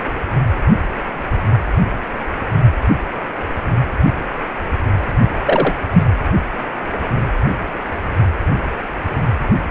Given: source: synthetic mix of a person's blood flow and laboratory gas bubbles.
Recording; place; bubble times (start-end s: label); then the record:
Doppler ultrasound of blood flow; precordium
5.46-5.75 s: bubbles
5.92-6.03 s: bubbles
From the record:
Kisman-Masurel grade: 123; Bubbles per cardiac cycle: 1 to 2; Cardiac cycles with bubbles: 10 to 50%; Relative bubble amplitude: loud (0.450 to 0.775); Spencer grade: 2 (many but less than half of the cardiac periods contain bubble signals, singularly or in groups); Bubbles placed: anywhere in the cardiac cycle